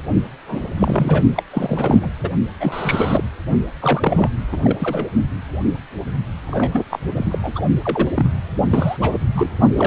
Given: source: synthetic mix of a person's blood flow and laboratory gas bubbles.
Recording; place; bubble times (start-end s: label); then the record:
Doppler ultrasound of blood flow; precordium
0.46-0.69 s: bubbles
0.79-1.22 s: bubbles
1.36-1.43 s: bubbles
1.53-2.11 s: bubbles
2.19-2.29 s: bubbles
2.60-3.23 s: bubbles
3.80-4.29 s: bubbles
4.51-4.57 s: bubbles
4.64-5.09 s: bubbles
6.46-6.84 s: bubbles
6.90-7.00 s: bubbles
7.16-7.38 s: bubbles
7.43-7.62 s: bubbles
7.82-8.09 s: bubbles
8.15-8.39 s: bubbles
8.70-8.98 s: bubbles
9.01-9.18 s: bubbles
9.36-9.50 s: bubbles
9.77-9.87 s: bubbles
From the record:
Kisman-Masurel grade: 332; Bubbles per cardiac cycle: rolling drumbeat, 9 or more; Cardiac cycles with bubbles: 50 to 99%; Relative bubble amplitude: moderate (0.250 to 0.450); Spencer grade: 3 (all of the cardiac periods contain showers or single bubble signals, but not dominating or overriding the cardiac motion signals); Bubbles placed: only in the low amplitude regions of the cardiac cycle